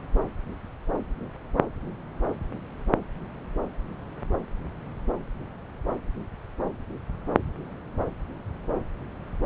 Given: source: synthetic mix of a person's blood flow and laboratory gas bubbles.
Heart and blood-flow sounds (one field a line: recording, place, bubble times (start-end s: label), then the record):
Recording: Doppler ultrasound of blood flow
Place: subclavian vein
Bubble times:
no bubbles
From the record:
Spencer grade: 0 (complete lack of bubble signals)